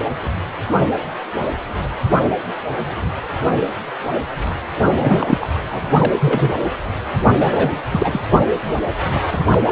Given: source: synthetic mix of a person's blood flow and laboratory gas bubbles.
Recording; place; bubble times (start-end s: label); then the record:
Doppler ultrasound of blood flow; precordium
0.00-0.02 s: bubbles
4.85-5.48 s: bubbles
5.71-6.12 s: bubbles
6.19-6.52 s: bubbles
7.36-7.79 s: bubbles
7.92-8.21 s: bubbles
9.09-9.21 s: bubbles
9.31-9.45 s: bubbles
9.48-9.58 s: bubbles
From the record:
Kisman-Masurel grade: 232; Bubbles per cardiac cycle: several, 3 to 8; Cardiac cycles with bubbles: 50 to 99%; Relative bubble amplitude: moderate (0.250 to 0.450); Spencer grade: 3 (all of the cardiac periods contain showers or single bubble signals, but not dominating or overriding the cardiac motion signals); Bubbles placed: anywhere in the cardiac cycle